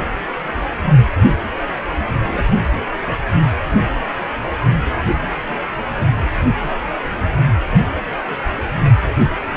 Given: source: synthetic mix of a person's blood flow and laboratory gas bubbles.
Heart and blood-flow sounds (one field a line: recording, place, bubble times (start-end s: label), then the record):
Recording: Doppler ultrasound of blood flow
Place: precordium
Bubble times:
2.31-2.45 s: bubbles
From the record:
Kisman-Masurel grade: 122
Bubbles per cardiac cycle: 1 to 2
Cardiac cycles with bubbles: 10 to 50%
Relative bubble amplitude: moderate (0.250 to 0.450)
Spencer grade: 2 (many but less than half of the cardiac periods contain bubble signals, singularly or in groups)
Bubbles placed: anywhere in the cardiac cycle